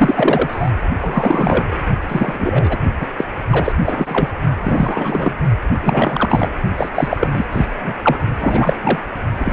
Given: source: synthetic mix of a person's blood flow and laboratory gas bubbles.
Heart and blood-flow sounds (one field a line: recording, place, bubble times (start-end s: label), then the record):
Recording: Doppler ultrasound of blood flow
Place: precordium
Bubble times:
0.00-0.72 s: bubbles
1.01-1.77 s: bubbles
2.08-2.78 s: bubbles
3.00-3.08 s: bubbles
3.17-3.25 s: bubbles
3.50-3.73 s: bubbles
3.86-4.30 s: bubbles
4.63-5.36 s: bubbles
5.83-6.49 s: bubbles
6.77-6.89 s: bubbles
6.95-7.28 s: bubbles
7.33-7.45 s: bubbles
7.52-7.66 s: bubbles
7.82-7.93 s: bubbles
8.02-8.19 s: bubbles
8.39-8.76 s: bubbles
8.83-8.99 s: bubbles
9.37-9.53 s: bubbles
From the record:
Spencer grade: 3 (all of the cardiac periods contain showers or single bubble signals, but not dominating or overriding the cardiac motion signals)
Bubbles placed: only in the low amplitude regions of the cardiac cycle